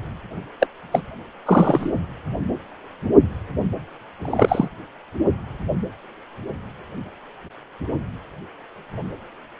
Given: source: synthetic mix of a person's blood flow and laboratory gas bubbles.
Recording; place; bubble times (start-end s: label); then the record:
Doppler ultrasound of blood flow; precordium
0.59-0.67 s: bubbles
0.92-1.02 s: bubbles
1.46-1.91 s: bubbles
4.25-4.68 s: bubbles
From the record:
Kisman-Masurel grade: 223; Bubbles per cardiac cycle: several, 3 to 8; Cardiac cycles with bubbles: 10 to 50%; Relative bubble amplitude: loud (0.450 to 0.775); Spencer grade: 2 (many but less than half of the cardiac periods contain bubble signals, singularly or in groups); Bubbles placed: anywhere in the cardiac cycle